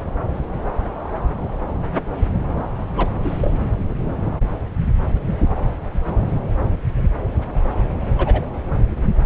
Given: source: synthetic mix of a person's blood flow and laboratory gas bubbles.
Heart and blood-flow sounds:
Doppler ultrasound of blood flow; subclavian vein
2.96-3.09 s: bubbles
3.22-3.54 s: bubbles
8.18-8.41 s: bubbles
From the record:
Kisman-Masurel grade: 122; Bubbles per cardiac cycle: 1 to 2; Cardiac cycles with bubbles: 10 to 50%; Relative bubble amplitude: moderate (0.250 to 0.450); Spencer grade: 2 (many but less than half of the cardiac periods contain bubble signals, singularly or in groups); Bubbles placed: anywhere in the cardiac cycle

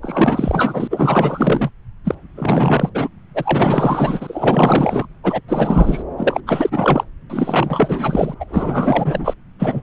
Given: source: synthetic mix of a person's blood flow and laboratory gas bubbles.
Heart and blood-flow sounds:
Doppler ultrasound of blood flow; subclavian vein
0.02-0.87 s: bubbles
0.90-1.70 s: bubbles
2.04-2.15 s: bubbles
2.35-2.90 s: bubbles
2.94-3.08 s: bubbles
3.34-5.06 s: bubbles
5.23-5.41 s: bubbles
5.48-6.03 s: bubbles
6.17-6.41 s: bubbles
6.46-7.04 s: bubbles
7.29-8.35 s: bubbles
8.39-8.45 s: bubbles
8.48-9.34 s: bubbles
9.58-9.81 s: bubbles
From the record:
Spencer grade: 4 (maximum detectable bubble signal sounding continuously throughout systole and diastole of every cardiac period, and overriding the amplitude of the normal cardiac signals); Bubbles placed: anywhere in the cardiac cycle

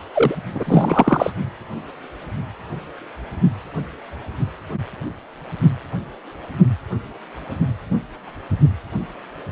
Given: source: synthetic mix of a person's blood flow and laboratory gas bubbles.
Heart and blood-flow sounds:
Doppler ultrasound of blood flow; precordium
0.14-0.35 s: bubbles
0.55-1.31 s: bubbles
From the record:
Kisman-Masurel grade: 213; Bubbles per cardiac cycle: several, 3 to 8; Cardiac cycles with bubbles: 1 to 10%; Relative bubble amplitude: loud (0.450 to 0.775); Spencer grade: 1 (occasional bubble signal discernible with the cardiac motion signal, with majority of cardiac periods free of bubbles); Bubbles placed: only in the low amplitude regions of the cardiac cycle

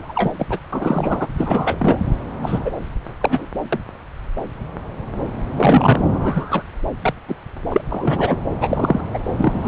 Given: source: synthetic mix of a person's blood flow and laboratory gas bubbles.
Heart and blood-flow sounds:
Doppler ultrasound of blood flow; subclavian vein
0.00-0.30 s: bubbles
0.38-0.46 s: bubbles
0.49-0.58 s: bubbles
0.72-1.27 s: bubbles
1.38-1.99 s: bubbles
2.43-2.59 s: bubbles
2.65-2.71 s: bubbles
3.21-3.46 s: bubbles
3.72-3.80 s: bubbles
5.56-6.00 s: bubbles
6.11-6.63 s: bubbles
7.02-7.13 s: bubbles
7.28-7.35 s: bubbles
7.71-7.82 s: bubbles
7.91-8.37 s: bubbles
8.61-9.01 s: bubbles
9.13-9.20 s: bubbles
9.38-9.68 s: bubbles
From the record:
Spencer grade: 3 (all of the cardiac periods contain showers or single bubble signals, but not dominating or overriding the cardiac motion signals); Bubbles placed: anywhere in the cardiac cycle

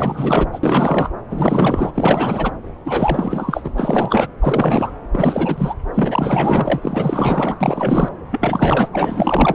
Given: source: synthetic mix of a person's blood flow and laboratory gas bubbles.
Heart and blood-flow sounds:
Doppler ultrasound of blood flow; subclavian vein
0.00-0.47 s: bubbles
0.52-0.59 s: bubbles
0.63-1.09 s: bubbles
1.30-1.92 s: bubbles
1.94-2.52 s: bubbles
2.84-3.70 s: bubbles
3.76-4.28 s: bubbles
4.41-4.91 s: bubbles
5.12-5.74 s: bubbles
5.94-6.79 s: bubbles
6.82-7.57 s: bubbles
7.60-8.09 s: bubbles
8.31-8.88 s: bubbles
8.92-9.54 s: bubbles
From the record:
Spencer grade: 4 (maximum detectable bubble signal sounding continuously throughout systole and diastole of every cardiac period, and overriding the amplitude of the normal cardiac signals); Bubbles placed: anywhere in the cardiac cycle

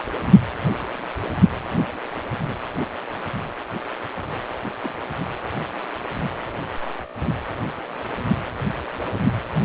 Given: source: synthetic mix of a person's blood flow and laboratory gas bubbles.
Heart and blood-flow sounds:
Doppler ultrasound of blood flow; precordium
4.82-4.94 s: bubbles
From the record:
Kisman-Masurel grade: 121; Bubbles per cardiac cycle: 1 to 2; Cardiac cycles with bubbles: 10 to 50%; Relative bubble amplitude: barely perceptible (0.100 to 0.250); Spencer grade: 2 (many but less than half of the cardiac periods contain bubble signals, singularly or in groups); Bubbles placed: anywhere in the cardiac cycle

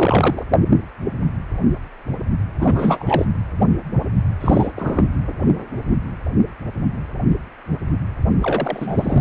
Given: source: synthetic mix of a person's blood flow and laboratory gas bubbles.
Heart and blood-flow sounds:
Doppler ultrasound of blood flow; precordium
0.00-0.42 s: bubbles
2.59-3.28 s: bubbles
4.41-4.71 s: bubbles
4.76-5.04 s: bubbles
8.41-9.21 s: bubbles
From the record:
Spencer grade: 2 (many but less than half of the cardiac periods contain bubble signals, singularly or in groups); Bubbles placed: anywhere in the cardiac cycle

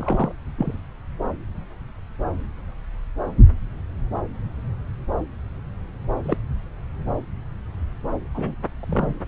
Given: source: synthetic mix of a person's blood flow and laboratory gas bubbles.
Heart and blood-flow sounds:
Doppler ultrasound of blood flow; subclavian vein
0.00-0.31 s: bubbles
0.57-0.77 s: bubbles
6.25-6.38 s: bubbles
8.35-8.55 s: bubbles
8.79-9.15 s: bubbles
From the record:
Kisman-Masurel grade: 122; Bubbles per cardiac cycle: 1 to 2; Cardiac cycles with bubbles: 10 to 50%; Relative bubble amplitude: moderate (0.250 to 0.450); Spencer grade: 2 (many but less than half of the cardiac periods contain bubble signals, singularly or in groups); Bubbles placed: anywhere in the cardiac cycle

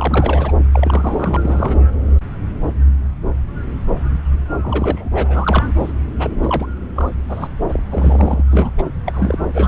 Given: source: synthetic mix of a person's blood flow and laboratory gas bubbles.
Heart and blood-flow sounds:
Doppler ultrasound of blood flow; subclavian vein
0.00-0.52 s: bubbles
0.71-1.79 s: bubbles
4.61-5.10 s: bubbles
5.13-5.92 s: bubbles
6.19-6.30 s: bubbles
6.42-6.66 s: bubbles
6.96-7.10 s: bubbles
7.29-7.47 s: bubbles
7.68-7.80 s: bubbles
7.90-8.43 s: bubbles
8.51-8.71 s: bubbles
8.78-8.83 s: bubbles
9.05-9.39 s: bubbles
9.54-9.68 s: bubbles
From the record:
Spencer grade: 3 (all of the cardiac periods contain showers or single bubble signals, but not dominating or overriding the cardiac motion signals); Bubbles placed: anywhere in the cardiac cycle

